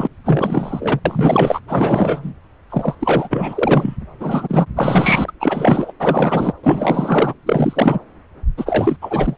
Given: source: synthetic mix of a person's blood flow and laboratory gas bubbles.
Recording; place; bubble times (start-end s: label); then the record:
Doppler ultrasound of blood flow; subclavian vein
0.00-0.08 s: bubbles
0.24-0.99 s: bubbles
1.05-1.60 s: bubbles
1.68-2.33 s: bubbles
2.70-2.95 s: bubbles
3.00-3.97 s: bubbles
4.20-4.66 s: bubbles
4.76-5.31 s: bubbles
5.40-5.92 s: bubbles
5.99-6.53 s: bubbles
6.63-7.33 s: bubbles
7.46-7.99 s: bubbles
8.57-8.96 s: bubbles
9.01-9.36 s: bubbles
From the record:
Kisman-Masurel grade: 444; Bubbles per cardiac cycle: continuous sound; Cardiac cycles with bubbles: 100%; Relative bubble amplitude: maximal (0.775 to 0.999); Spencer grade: 4 (maximum detectable bubble signal sounding continuously throughout systole and diastole of every cardiac period, and overriding the amplitude of the normal cardiac signals); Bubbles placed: anywhere in the cardiac cycle